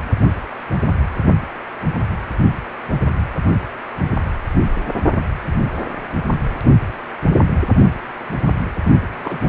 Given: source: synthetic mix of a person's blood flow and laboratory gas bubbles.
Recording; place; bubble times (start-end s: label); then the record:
Doppler ultrasound of blood flow; precordium
9.20-9.38 s: bubbles
9.44-9.49 s: bubbles
From the record:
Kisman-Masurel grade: 211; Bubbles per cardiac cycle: several, 3 to 8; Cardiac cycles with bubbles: 1 to 10%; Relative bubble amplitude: barely perceptible (0.100 to 0.250); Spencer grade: 1 (occasional bubble signal discernible with the cardiac motion signal, with majority of cardiac periods free of bubbles); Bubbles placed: only in the low amplitude regions of the cardiac cycle